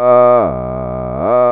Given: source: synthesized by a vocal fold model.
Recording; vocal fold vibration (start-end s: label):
sustained vowel that changes in the middle
0.00-0.35 s: 122.8 Hz, open quotient 0.20
0.55-1.15 s: 63.2 Hz, open quotient 0.31
1.35-1.52 s: 122.8 Hz, open quotient 0.20